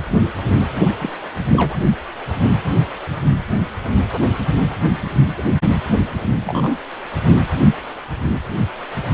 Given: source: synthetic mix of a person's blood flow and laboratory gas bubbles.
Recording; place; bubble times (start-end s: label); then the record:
Doppler ultrasound of blood flow; precordium
1.01-1.09 s: bubbles
1.53-1.76 s: bubbles
5.34-5.43 s: bubbles
6.45-6.78 s: bubbles
From the record:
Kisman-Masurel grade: 122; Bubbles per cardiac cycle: 1 to 2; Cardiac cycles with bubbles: 10 to 50%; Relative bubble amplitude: moderate (0.250 to 0.450); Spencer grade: 2 (many but less than half of the cardiac periods contain bubble signals, singularly or in groups); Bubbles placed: anywhere in the cardiac cycle